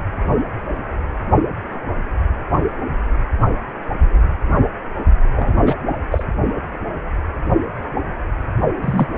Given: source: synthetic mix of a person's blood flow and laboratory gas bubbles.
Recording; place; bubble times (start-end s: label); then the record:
Doppler ultrasound of blood flow; precordium
5.36-5.76 s: bubbles
6.11-6.24 s: bubbles
8.81-9.06 s: bubbles
From the record:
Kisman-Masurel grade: 223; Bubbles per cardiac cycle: several, 3 to 8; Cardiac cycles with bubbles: 10 to 50%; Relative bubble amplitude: loud (0.450 to 0.775); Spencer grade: 2 (many but less than half of the cardiac periods contain bubble signals, singularly or in groups); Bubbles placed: only in the low amplitude regions of the cardiac cycle